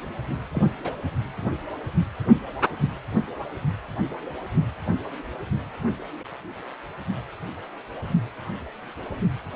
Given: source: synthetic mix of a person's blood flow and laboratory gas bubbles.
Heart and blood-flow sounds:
Doppler ultrasound of blood flow; precordium
0.53-0.62 s: bubbles
0.84-0.91 s: bubbles
From the record:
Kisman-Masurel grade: 111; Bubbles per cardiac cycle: 1 to 2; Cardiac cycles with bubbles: 1 to 10%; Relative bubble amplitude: barely perceptible (0.100 to 0.250); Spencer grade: 1 (occasional bubble signal discernible with the cardiac motion signal, with majority of cardiac periods free of bubbles); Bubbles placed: only in the low amplitude regions of the cardiac cycle

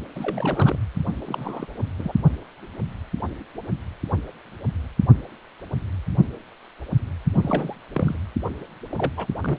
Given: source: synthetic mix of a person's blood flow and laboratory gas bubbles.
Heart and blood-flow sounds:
Doppler ultrasound of blood flow; precordium
0.15-0.78 s: bubbles
1.26-1.66 s: bubbles
1.99-2.12 s: bubbles
7.32-7.76 s: bubbles
7.92-8.15 s: bubbles
8.89-9.12 s: bubbles
9.16-9.26 s: bubbles
9.40-9.58 s: bubbles
From the record:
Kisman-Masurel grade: 221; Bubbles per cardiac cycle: several, 3 to 8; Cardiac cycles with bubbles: 10 to 50%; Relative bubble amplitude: barely perceptible (0.100 to 0.250); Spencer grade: 2 (many but less than half of the cardiac periods contain bubble signals, singularly or in groups); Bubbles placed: only in the low amplitude regions of the cardiac cycle

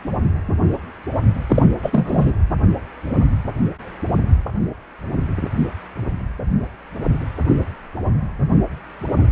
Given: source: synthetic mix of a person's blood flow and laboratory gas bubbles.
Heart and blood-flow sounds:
Doppler ultrasound of blood flow; precordium
1.49-1.66 s: bubbles
1.82-2.33 s: bubbles
From the record:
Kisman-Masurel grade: 213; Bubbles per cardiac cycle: several, 3 to 8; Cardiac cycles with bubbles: 1 to 10%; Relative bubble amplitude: loud (0.450 to 0.775); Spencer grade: 1 (occasional bubble signal discernible with the cardiac motion signal, with majority of cardiac periods free of bubbles); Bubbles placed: anywhere in the cardiac cycle

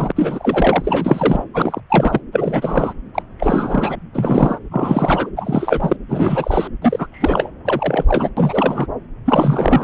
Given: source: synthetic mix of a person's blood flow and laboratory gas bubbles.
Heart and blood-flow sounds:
Doppler ultrasound of blood flow; subclavian vein
0.00-0.12 s: bubbles
0.15-1.43 s: bubbles
1.53-1.80 s: bubbles
1.89-2.21 s: bubbles
2.32-2.93 s: bubbles
3.15-3.23 s: bubbles
3.39-3.96 s: bubbles
4.14-4.59 s: bubbles
4.71-5.30 s: bubbles
5.36-5.96 s: bubbles
6.08-6.67 s: bubbles
6.82-7.07 s: bubbles
7.12-7.51 s: bubbles
7.65-8.05 s: bubbles
8.08-8.30 s: bubbles
8.37-8.87 s: bubbles
9.25-9.84 s: bubbles
From the record:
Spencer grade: 3 (all of the cardiac periods contain showers or single bubble signals, but not dominating or overriding the cardiac motion signals); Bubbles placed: anywhere in the cardiac cycle

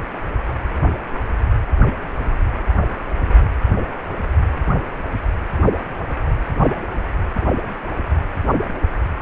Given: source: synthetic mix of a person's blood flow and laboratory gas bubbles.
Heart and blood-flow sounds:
Doppler ultrasound of blood flow; precordium
no bubbles
From the record:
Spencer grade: 0 (complete lack of bubble signals)

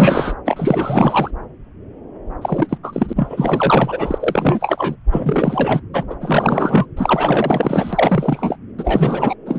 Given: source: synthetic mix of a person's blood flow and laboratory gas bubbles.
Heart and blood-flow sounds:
Doppler ultrasound of blood flow; subclavian vein
0.00-0.36 s: bubbles
0.45-1.31 s: bubbles
2.41-2.78 s: bubbles
2.83-3.13 s: bubbles
3.15-4.96 s: bubbles
5.11-5.81 s: bubbles
5.93-6.04 s: bubbles
6.10-6.15 s: bubbles
6.21-6.85 s: bubbles
6.96-8.57 s: bubbles
8.79-9.35 s: bubbles
9.46-9.59 s: bubbles
From the record:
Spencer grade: 4 (maximum detectable bubble signal sounding continuously throughout systole and diastole of every cardiac period, and overriding the amplitude of the normal cardiac signals); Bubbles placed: anywhere in the cardiac cycle

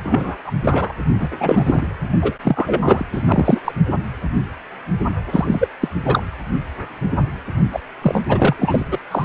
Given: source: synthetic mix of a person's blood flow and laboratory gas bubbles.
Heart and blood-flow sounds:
Doppler ultrasound of blood flow; precordium
0.00-0.36 s: bubbles
0.45-0.51 s: bubbles
0.64-0.92 s: bubbles
1.19-1.28 s: bubbles
1.38-1.88 s: bubbles
2.21-2.34 s: bubbles
2.43-3.04 s: bubbles
3.12-3.23 s: bubbles
3.26-3.62 s: bubbles
3.64-3.72 s: bubbles
5.31-5.68 s: bubbles
5.80-5.88 s: bubbles
6.05-6.23 s: bubbles
7.72-7.79 s: bubbles
8.02-8.22 s: bubbles
8.28-8.56 s: bubbles
8.59-8.83 s: bubbles
8.91-8.99 s: bubbles
9.11-9.25 s: bubbles
From the record:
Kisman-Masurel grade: 233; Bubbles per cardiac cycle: several, 3 to 8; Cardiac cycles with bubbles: 50 to 99%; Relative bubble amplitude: loud (0.450 to 0.775); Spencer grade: 3 (all of the cardiac periods contain showers or single bubble signals, but not dominating or overriding the cardiac motion signals); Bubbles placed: anywhere in the cardiac cycle

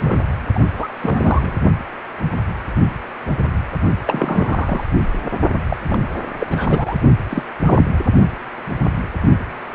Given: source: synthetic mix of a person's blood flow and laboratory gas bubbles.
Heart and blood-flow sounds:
Doppler ultrasound of blood flow; precordium
0.00-0.29 s: bubbles
0.54-0.59 s: bubbles
0.77-0.87 s: bubbles
1.01-1.57 s: bubbles
4.06-4.85 s: bubbles
5.68-5.76 s: bubbles
5.88-6.09 s: bubbles
6.38-6.47 s: bubbles
6.50-6.97 s: bubbles
7.29-7.42 s: bubbles
7.65-7.86 s: bubbles
From the record:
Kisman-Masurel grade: 232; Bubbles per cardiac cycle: several, 3 to 8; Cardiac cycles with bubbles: 50 to 99%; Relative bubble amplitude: moderate (0.250 to 0.450); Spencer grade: 3 (all of the cardiac periods contain showers or single bubble signals, but not dominating or overriding the cardiac motion signals); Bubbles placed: only in the low amplitude regions of the cardiac cycle

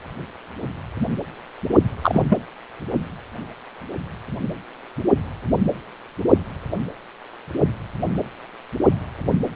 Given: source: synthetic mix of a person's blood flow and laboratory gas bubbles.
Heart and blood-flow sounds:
Doppler ultrasound of blood flow; precordium
2.02-2.22 s: bubbles
2.29-2.38 s: bubbles
From the record:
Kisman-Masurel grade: 213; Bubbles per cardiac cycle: several, 3 to 8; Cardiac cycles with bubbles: 1 to 10%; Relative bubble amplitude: loud (0.450 to 0.775); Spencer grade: 1 (occasional bubble signal discernible with the cardiac motion signal, with majority of cardiac periods free of bubbles); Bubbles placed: only in the low amplitude regions of the cardiac cycle

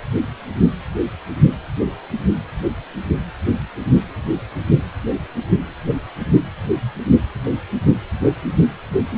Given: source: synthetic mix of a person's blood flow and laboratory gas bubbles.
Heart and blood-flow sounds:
Doppler ultrasound of blood flow; precordium
no bubbles
From the record:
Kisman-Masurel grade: 000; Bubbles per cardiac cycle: 0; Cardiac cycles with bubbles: 0%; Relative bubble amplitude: no bubbles discernible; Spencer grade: 0 (complete lack of bubble signals)

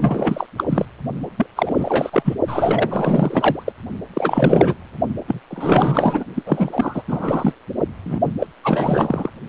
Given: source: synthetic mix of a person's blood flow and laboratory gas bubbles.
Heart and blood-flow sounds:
Doppler ultrasound of blood flow; precordium
0.00-0.46 s: bubbles
0.57-0.63 s: bubbles
0.69-0.86 s: bubbles
1.37-1.46 s: bubbles
1.56-2.10 s: bubbles
2.12-2.34 s: bubbles
2.47-3.72 s: bubbles
4.14-4.75 s: bubbles
5.27-5.41 s: bubbles
5.50-6.24 s: bubbles
6.34-6.43 s: bubbles
6.46-7.03 s: bubbles
7.08-7.54 s: bubbles
8.05-8.19 s: bubbles
8.39-8.46 s: bubbles
8.63-9.29 s: bubbles
From the record:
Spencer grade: 4 (maximum detectable bubble signal sounding continuously throughout systole and diastole of every cardiac period, and overriding the amplitude of the normal cardiac signals); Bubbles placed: only in the low amplitude regions of the cardiac cycle

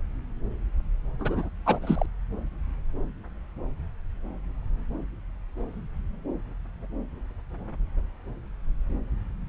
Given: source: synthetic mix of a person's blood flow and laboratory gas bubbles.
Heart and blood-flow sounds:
Doppler ultrasound of blood flow; subclavian vein
1.19-1.49 s: bubbles
1.66-1.78 s: bubbles
1.82-2.06 s: bubbles
From the record:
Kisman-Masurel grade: 211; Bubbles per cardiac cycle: several, 3 to 8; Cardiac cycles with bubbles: 1 to 10%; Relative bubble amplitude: barely perceptible (0.100 to 0.250); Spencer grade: 1 (occasional bubble signal discernible with the cardiac motion signal, with majority of cardiac periods free of bubbles); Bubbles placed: anywhere in the cardiac cycle

